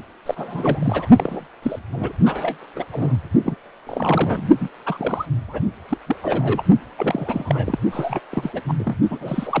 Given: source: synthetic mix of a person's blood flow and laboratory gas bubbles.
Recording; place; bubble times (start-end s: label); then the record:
Doppler ultrasound of blood flow; precordium
0.26-1.09 s: bubbles
1.16-1.48 s: bubbles
1.62-1.79 s: bubbles
1.93-2.12 s: bubbles
2.25-2.56 s: bubbles
2.75-2.85 s: bubbles
2.92-3.28 s: bubbles
3.44-3.55 s: bubbles
3.86-4.49 s: bubbles
4.59-4.69 s: bubbles
4.86-5.25 s: bubbles
5.47-5.62 s: bubbles
5.89-5.97 s: bubbles
6.06-6.16 s: bubbles
6.22-6.62 s: bubbles
6.97-7.78 s: bubbles
7.91-8.20 s: bubbles
8.31-8.61 s: bubbles
8.68-8.73 s: bubbles
8.79-8.96 s: bubbles
9.10-9.60 s: bubbles
From the record:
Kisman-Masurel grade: 342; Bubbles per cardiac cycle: rolling drumbeat, 9 or more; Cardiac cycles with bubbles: 100%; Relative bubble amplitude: moderate (0.250 to 0.450); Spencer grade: 3 (all of the cardiac periods contain showers or single bubble signals, but not dominating or overriding the cardiac motion signals); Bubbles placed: only in the low amplitude regions of the cardiac cycle